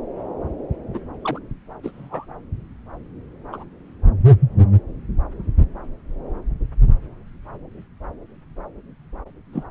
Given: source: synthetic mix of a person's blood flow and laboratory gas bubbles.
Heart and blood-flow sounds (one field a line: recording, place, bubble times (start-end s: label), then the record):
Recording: Doppler ultrasound of blood flow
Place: subclavian vein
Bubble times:
0.94-0.99 s: bubbles
1.24-1.39 s: bubbles
1.83-1.90 s: bubbles
1.94-2.25 s: bubbles
3.52-3.65 s: bubbles
9.53-9.63 s: bubbles
From the record:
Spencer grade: 2 (many but less than half of the cardiac periods contain bubble signals, singularly or in groups)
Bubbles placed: anywhere in the cardiac cycle